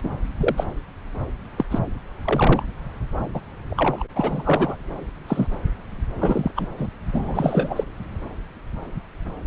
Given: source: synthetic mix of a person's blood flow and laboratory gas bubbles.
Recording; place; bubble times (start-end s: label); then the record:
Doppler ultrasound of blood flow; subclavian vein
0.03-0.09 s: bubbles
0.39-0.64 s: bubbles
1.56-1.66 s: bubbles
1.71-1.79 s: bubbles
2.25-2.63 s: bubbles
3.33-3.40 s: bubbles
3.70-4.07 s: bubbles
4.16-4.76 s: bubbles
5.28-5.48 s: bubbles
6.15-6.51 s: bubbles
6.56-6.67 s: bubbles
6.78-6.87 s: bubbles
7.12-7.84 s: bubbles
From the record:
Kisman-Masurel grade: 232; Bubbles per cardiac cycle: several, 3 to 8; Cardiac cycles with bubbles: 50 to 99%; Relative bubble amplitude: moderate (0.250 to 0.450); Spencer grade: 3 (all of the cardiac periods contain showers or single bubble signals, but not dominating or overriding the cardiac motion signals); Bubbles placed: anywhere in the cardiac cycle